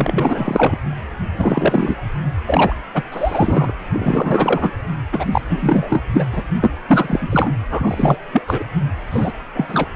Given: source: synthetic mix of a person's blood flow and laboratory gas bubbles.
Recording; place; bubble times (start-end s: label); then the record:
Doppler ultrasound of blood flow; precordium
0.00-0.76 s: bubbles
1.38-1.96 s: bubbles
2.46-2.74 s: bubbles
2.94-3.02 s: bubbles
3.10-3.72 s: bubbles
3.93-4.72 s: bubbles
5.12-5.25 s: bubbles
5.31-5.42 s: bubbles
5.50-6.04 s: bubbles
6.12-6.25 s: bubbles
6.31-6.43 s: bubbles
6.61-6.71 s: bubbles
6.88-7.28 s: bubbles
7.30-7.52 s: bubbles
7.71-8.17 s: bubbles
8.33-8.42 s: bubbles
8.48-8.63 s: bubbles
9.11-9.33 s: bubbles
9.54-9.88 s: bubbles
From the record:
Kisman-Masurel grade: 333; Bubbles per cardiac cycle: rolling drumbeat, 9 or more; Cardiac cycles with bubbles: 50 to 99%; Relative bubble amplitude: loud (0.450 to 0.775); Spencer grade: 3 (all of the cardiac periods contain showers or single bubble signals, but not dominating or overriding the cardiac motion signals); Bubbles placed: anywhere in the cardiac cycle